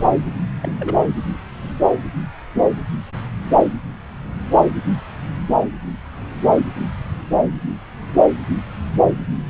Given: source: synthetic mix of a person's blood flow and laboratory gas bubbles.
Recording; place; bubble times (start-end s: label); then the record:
Doppler ultrasound of blood flow; subclavian vein
0.62-0.72 s: bubbles
0.79-0.95 s: bubbles
From the record:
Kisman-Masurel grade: 211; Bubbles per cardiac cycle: several, 3 to 8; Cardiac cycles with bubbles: 1 to 10%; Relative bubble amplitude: barely perceptible (0.100 to 0.250); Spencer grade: 1 (occasional bubble signal discernible with the cardiac motion signal, with majority of cardiac periods free of bubbles); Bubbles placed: anywhere in the cardiac cycle